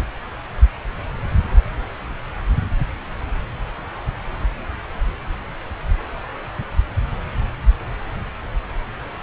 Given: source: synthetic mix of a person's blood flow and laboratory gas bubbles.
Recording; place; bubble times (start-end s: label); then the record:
Doppler ultrasound of blood flow; subclavian vein
no bubbles
From the record:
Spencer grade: 0 (complete lack of bubble signals)